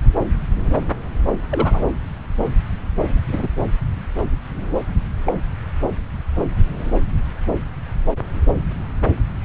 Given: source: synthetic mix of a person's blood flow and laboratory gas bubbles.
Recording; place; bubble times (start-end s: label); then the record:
Doppler ultrasound of blood flow; subclavian vein
1.50-1.83 s: bubbles
3.07-3.21 s: bubbles
3.27-3.48 s: bubbles
5.26-5.34 s: bubbles
From the record:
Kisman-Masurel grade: 122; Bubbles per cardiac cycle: 1 to 2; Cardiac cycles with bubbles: 10 to 50%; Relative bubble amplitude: moderate (0.250 to 0.450); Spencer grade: 2 (many but less than half of the cardiac periods contain bubble signals, singularly or in groups); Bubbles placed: anywhere in the cardiac cycle